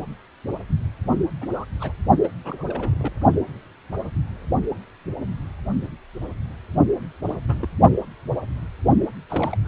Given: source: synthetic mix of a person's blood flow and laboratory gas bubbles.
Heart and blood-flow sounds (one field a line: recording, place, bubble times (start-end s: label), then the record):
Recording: Doppler ultrasound of blood flow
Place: precordium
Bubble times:
1.41-1.47 s: bubbles
1.53-1.65 s: bubbles
1.80-1.92 s: bubbles
2.23-2.28 s: bubbles
2.44-2.65 s: bubbles
2.68-3.12 s: bubbles
7.25-7.68 s: bubbles
9.29-9.57 s: bubbles
9.64-9.68 s: bubbles
From the record:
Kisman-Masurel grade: 221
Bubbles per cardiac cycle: several, 3 to 8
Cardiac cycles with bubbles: 10 to 50%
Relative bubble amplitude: barely perceptible (0.100 to 0.250)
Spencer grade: 2 (many but less than half of the cardiac periods contain bubble signals, singularly or in groups)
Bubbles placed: only in the low amplitude regions of the cardiac cycle